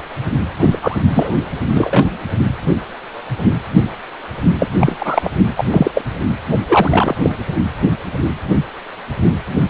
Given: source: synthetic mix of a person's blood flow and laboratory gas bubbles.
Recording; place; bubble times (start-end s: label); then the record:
Doppler ultrasound of blood flow; precordium
0.60-0.78 s: bubbles
0.81-0.97 s: bubbles
1.12-1.32 s: bubbles
1.74-2.29 s: bubbles
4.58-4.67 s: bubbles
4.80-5.31 s: bubbles
5.57-5.65 s: bubbles
5.71-5.91 s: bubbles
5.95-6.04 s: bubbles
6.67-7.15 s: bubbles
7.23-7.36 s: bubbles
From the record:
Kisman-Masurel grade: 233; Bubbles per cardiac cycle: several, 3 to 8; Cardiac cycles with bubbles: 50 to 99%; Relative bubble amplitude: loud (0.450 to 0.775); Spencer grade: 3 (all of the cardiac periods contain showers or single bubble signals, but not dominating or overriding the cardiac motion signals); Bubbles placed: anywhere in the cardiac cycle